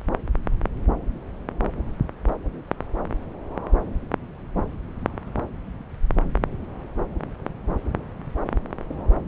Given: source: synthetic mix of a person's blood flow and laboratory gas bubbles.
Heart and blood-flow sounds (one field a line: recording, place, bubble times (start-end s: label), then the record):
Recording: Doppler ultrasound of blood flow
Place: subclavian vein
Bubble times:
no bubbles
From the record:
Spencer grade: 0 (complete lack of bubble signals)